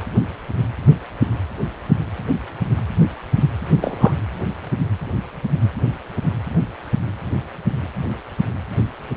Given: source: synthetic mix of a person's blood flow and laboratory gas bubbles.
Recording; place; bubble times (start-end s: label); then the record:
Doppler ultrasound of blood flow; precordium
3.77-4.18 s: bubbles
From the record:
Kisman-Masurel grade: 113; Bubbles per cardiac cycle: 1 to 2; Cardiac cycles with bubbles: 1 to 10%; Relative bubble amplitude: loud (0.450 to 0.775); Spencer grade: 1 (occasional bubble signal discernible with the cardiac motion signal, with majority of cardiac periods free of bubbles); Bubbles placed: anywhere in the cardiac cycle